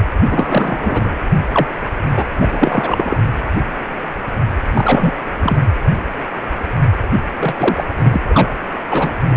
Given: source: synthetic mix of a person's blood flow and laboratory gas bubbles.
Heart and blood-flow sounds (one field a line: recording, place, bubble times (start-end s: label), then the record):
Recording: Doppler ultrasound of blood flow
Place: precordium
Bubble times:
0.30-1.09 s: bubbles
1.52-1.68 s: bubbles
2.14-2.24 s: bubbles
2.39-3.17 s: bubbles
4.74-5.12 s: bubbles
5.42-5.57 s: bubbles
7.40-7.84 s: bubbles
7.96-8.20 s: bubbles
8.28-8.49 s: bubbles
8.90-9.36 s: bubbles
From the record:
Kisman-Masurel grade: 233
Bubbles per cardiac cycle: several, 3 to 8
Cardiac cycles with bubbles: 50 to 99%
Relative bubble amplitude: loud (0.450 to 0.775)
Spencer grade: 3 (all of the cardiac periods contain showers or single bubble signals, but not dominating or overriding the cardiac motion signals)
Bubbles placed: anywhere in the cardiac cycle